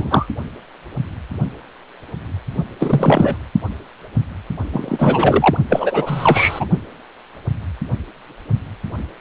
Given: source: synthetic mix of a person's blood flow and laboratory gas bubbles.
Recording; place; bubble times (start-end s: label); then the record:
Doppler ultrasound of blood flow; precordium
0.00-0.27 s: bubbles
2.79-3.38 s: bubbles
4.72-5.58 s: bubbles
5.69-6.68 s: bubbles
From the record:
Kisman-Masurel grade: 333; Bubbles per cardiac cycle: rolling drumbeat, 9 or more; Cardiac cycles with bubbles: 50 to 99%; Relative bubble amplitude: loud (0.450 to 0.775); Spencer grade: 3 (all of the cardiac periods contain showers or single bubble signals, but not dominating or overriding the cardiac motion signals); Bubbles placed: only in the low amplitude regions of the cardiac cycle